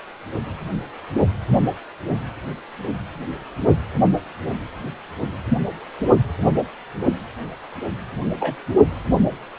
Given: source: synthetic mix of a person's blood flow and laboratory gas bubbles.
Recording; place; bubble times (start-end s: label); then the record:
Doppler ultrasound of blood flow; precordium
8.39-8.57 s: bubbles
From the record:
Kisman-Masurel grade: 122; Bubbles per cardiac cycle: 1 to 2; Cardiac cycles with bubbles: 10 to 50%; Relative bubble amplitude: moderate (0.250 to 0.450); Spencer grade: 2 (many but less than half of the cardiac periods contain bubble signals, singularly or in groups); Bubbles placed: anywhere in the cardiac cycle